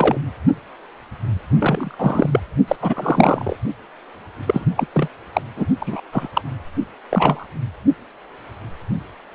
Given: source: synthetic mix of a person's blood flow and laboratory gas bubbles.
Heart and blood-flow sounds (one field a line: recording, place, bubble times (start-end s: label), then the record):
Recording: Doppler ultrasound of blood flow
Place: precordium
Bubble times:
0.00-0.18 s: bubbles
1.58-2.40 s: bubbles
2.68-2.76 s: bubbles
2.81-3.56 s: bubbles
4.46-4.66 s: bubbles
4.75-4.86 s: bubbles
4.94-5.08 s: bubbles
5.33-5.42 s: bubbles
5.56-5.66 s: bubbles
5.80-6.00 s: bubbles
6.12-6.28 s: bubbles
6.33-6.42 s: bubbles
7.10-7.46 s: bubbles
From the record:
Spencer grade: 3 (all of the cardiac periods contain showers or single bubble signals, but not dominating or overriding the cardiac motion signals)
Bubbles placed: only in the low amplitude regions of the cardiac cycle